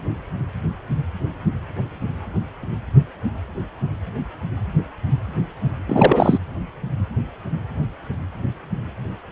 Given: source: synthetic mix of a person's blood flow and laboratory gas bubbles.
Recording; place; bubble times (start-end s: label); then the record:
Doppler ultrasound of blood flow; precordium
5.87-6.38 s: bubbles
From the record:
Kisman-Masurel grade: 213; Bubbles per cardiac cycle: several, 3 to 8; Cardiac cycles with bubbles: 1 to 10%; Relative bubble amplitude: loud (0.450 to 0.775); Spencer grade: 1 (occasional bubble signal discernible with the cardiac motion signal, with majority of cardiac periods free of bubbles); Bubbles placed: anywhere in the cardiac cycle